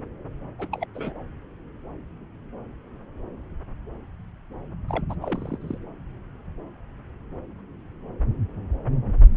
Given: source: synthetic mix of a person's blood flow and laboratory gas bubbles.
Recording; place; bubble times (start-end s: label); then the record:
Doppler ultrasound of blood flow; subclavian vein
0.58-0.68 s: bubbles
0.72-0.86 s: bubbles
0.95-1.22 s: bubbles
4.88-5.04 s: bubbles
5.09-5.14 s: bubbles
5.22-5.58 s: bubbles
5.60-5.78 s: bubbles
From the record:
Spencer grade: 2 (many but less than half of the cardiac periods contain bubble signals, singularly or in groups); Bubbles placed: anywhere in the cardiac cycle